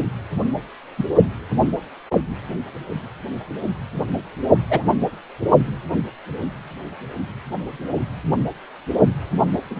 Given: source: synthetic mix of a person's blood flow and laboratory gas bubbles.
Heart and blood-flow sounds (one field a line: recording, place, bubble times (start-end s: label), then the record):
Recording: Doppler ultrasound of blood flow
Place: precordium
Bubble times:
0.97-1.05 s: bubbles
4.70-4.83 s: bubbles
4.88-4.95 s: bubbles
9.69-9.80 s: bubbles
From the record:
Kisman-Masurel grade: 122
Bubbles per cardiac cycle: 1 to 2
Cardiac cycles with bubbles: 10 to 50%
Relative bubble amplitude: moderate (0.250 to 0.450)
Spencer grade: 2 (many but less than half of the cardiac periods contain bubble signals, singularly or in groups)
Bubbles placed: only in the low amplitude regions of the cardiac cycle